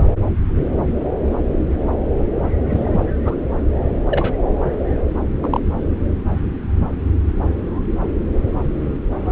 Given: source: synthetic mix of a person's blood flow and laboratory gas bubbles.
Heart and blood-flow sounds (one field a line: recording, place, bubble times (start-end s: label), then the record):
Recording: Doppler ultrasound of blood flow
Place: subclavian vein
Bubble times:
2.70-3.04 s: bubbles
3.25-3.35 s: bubbles
4.11-4.33 s: bubbles
5.42-5.60 s: bubbles
From the record:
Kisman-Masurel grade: 122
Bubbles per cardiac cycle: 1 to 2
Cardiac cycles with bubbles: 10 to 50%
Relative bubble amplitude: moderate (0.250 to 0.450)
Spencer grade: 2 (many but less than half of the cardiac periods contain bubble signals, singularly or in groups)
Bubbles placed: anywhere in the cardiac cycle